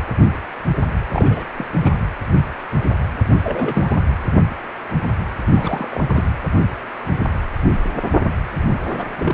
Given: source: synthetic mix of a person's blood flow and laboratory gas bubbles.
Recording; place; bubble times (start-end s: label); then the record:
Doppler ultrasound of blood flow; precordium
1.10-1.45 s: bubbles
1.58-1.66 s: bubbles
1.82-1.92 s: bubbles
3.44-3.98 s: bubbles
5.52-6.04 s: bubbles
6.08-6.29 s: bubbles
8.69-8.74 s: bubbles
8.89-9.06 s: bubbles
9.18-9.33 s: bubbles
From the record:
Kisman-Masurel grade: 221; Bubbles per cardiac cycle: several, 3 to 8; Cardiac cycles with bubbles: 10 to 50%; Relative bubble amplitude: barely perceptible (0.100 to 0.250); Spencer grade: 2 (many but less than half of the cardiac periods contain bubble signals, singularly or in groups); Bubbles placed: anywhere in the cardiac cycle